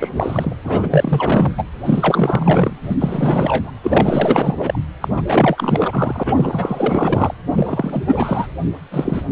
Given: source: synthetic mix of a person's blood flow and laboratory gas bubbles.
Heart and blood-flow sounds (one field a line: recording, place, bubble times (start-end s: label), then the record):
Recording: Doppler ultrasound of blood flow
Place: precordium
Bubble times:
0.00-0.09 s: bubbles
0.15-0.56 s: bubbles
0.63-1.64 s: bubbles
1.84-2.76 s: bubbles
2.81-2.96 s: bubbles
2.99-3.72 s: bubbles
3.83-4.79 s: bubbles
5.01-5.08 s: bubbles
5.16-5.22 s: bubbles
5.27-7.34 s: bubbles
7.50-8.02 s: bubbles
8.07-8.47 s: bubbles
8.91-9.22 s: bubbles
From the record:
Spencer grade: 4 (maximum detectable bubble signal sounding continuously throughout systole and diastole of every cardiac period, and overriding the amplitude of the normal cardiac signals)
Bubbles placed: anywhere in the cardiac cycle